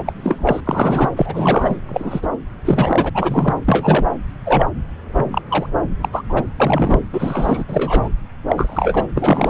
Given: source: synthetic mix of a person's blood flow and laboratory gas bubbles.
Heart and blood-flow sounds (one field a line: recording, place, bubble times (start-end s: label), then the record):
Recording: Doppler ultrasound of blood flow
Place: subclavian vein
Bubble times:
0.00-0.12 s: bubbles
0.15-0.60 s: bubbles
0.66-1.09 s: bubbles
1.16-1.77 s: bubbles
1.89-2.28 s: bubbles
2.65-3.10 s: bubbles
3.15-3.54 s: bubbles
3.66-4.05 s: bubbles
4.45-4.67 s: bubbles
5.13-5.42 s: bubbles
5.49-5.67 s: bubbles
6.01-6.08 s: bubbles
6.12-6.22 s: bubbles
6.29-6.43 s: bubbles
6.59-7.00 s: bubbles
7.12-7.64 s: bubbles
7.68-8.10 s: bubbles
8.48-9.05 s: bubbles
9.16-9.50 s: bubbles
From the record:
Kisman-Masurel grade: 243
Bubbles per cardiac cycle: several, 3 to 8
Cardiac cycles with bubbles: 100%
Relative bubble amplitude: loud (0.450 to 0.775)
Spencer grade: 3 (all of the cardiac periods contain showers or single bubble signals, but not dominating or overriding the cardiac motion signals)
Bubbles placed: anywhere in the cardiac cycle